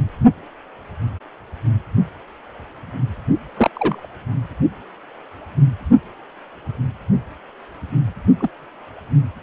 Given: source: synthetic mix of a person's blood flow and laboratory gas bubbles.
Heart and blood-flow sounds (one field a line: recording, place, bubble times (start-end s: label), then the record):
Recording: Doppler ultrasound of blood flow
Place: precordium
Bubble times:
3.57-3.70 s: bubbles
3.75-4.06 s: bubbles
8.40-8.49 s: bubbles
From the record:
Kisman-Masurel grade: 122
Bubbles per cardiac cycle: 1 to 2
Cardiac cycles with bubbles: 10 to 50%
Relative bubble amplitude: moderate (0.250 to 0.450)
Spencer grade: 2 (many but less than half of the cardiac periods contain bubble signals, singularly or in groups)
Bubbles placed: only in the low amplitude regions of the cardiac cycle